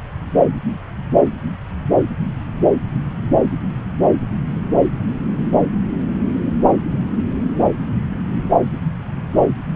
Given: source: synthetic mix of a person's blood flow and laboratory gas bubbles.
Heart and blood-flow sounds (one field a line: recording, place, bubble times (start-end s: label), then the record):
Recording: Doppler ultrasound of blood flow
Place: subclavian vein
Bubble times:
no bubbles
From the record:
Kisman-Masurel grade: 000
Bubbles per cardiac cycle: 0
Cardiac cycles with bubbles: 0%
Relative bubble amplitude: no bubbles discernible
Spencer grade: 0 (complete lack of bubble signals)